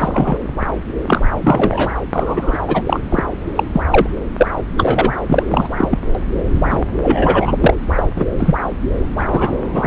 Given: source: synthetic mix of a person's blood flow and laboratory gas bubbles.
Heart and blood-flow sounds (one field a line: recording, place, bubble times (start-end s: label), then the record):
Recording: Doppler ultrasound of blood flow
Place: subclavian vein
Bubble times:
0.00-0.39 s: bubbles
1.07-1.22 s: bubbles
1.41-1.91 s: bubbles
2.12-2.58 s: bubbles
2.67-2.82 s: bubbles
2.87-3.01 s: bubbles
3.10-3.22 s: bubbles
3.56-3.64 s: bubbles
3.73-3.81 s: bubbles
3.91-4.07 s: bubbles
4.37-4.47 s: bubbles
4.77-5.13 s: bubbles
5.28-5.67 s: bubbles
5.76-5.98 s: bubbles
6.53-6.84 s: bubbles
7.02-7.54 s: bubbles
7.60-7.74 s: bubbles
7.96-8.07 s: bubbles
8.16-8.25 s: bubbles
8.38-8.55 s: bubbles
9.18-9.58 s: bubbles
9.73-9.87 s: bubbles
From the record:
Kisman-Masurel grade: 243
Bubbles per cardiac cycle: several, 3 to 8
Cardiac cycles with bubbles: 100%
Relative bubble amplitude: loud (0.450 to 0.775)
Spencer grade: 3 (all of the cardiac periods contain showers or single bubble signals, but not dominating or overriding the cardiac motion signals)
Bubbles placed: anywhere in the cardiac cycle